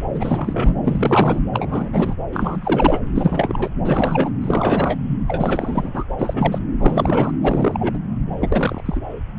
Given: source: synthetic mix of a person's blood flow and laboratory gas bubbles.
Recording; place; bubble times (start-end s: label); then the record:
Doppler ultrasound of blood flow; subclavian vein
0.08-0.74 s: bubbles
0.83-1.41 s: bubbles
1.53-1.90 s: bubbles
1.92-2.15 s: bubbles
2.32-3.00 s: bubbles
3.15-3.71 s: bubbles
3.84-4.33 s: bubbles
4.41-4.98 s: bubbles
5.26-6.05 s: bubbles
6.18-6.58 s: bubbles
6.79-7.32 s: bubbles
7.42-7.98 s: bubbles
8.41-8.82 s: bubbles
8.85-9.02 s: bubbles
From the record:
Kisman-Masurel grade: 343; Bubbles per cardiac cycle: rolling drumbeat, 9 or more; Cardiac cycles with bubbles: 100%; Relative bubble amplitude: loud (0.450 to 0.775); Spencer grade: 3 (all of the cardiac periods contain showers or single bubble signals, but not dominating or overriding the cardiac motion signals); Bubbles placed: anywhere in the cardiac cycle